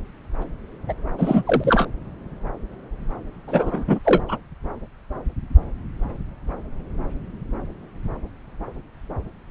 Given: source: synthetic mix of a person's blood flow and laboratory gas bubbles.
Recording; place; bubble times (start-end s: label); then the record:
Doppler ultrasound of blood flow; subclavian vein
0.89-0.94 s: bubbles
1.18-1.43 s: bubbles
1.45-1.86 s: bubbles
3.48-3.99 s: bubbles
4.04-4.21 s: bubbles
4.28-4.37 s: bubbles
From the record:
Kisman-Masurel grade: 223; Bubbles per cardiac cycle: several, 3 to 8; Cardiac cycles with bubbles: 10 to 50%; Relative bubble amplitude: loud (0.450 to 0.775); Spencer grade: 2 (many but less than half of the cardiac periods contain bubble signals, singularly or in groups); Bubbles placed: anywhere in the cardiac cycle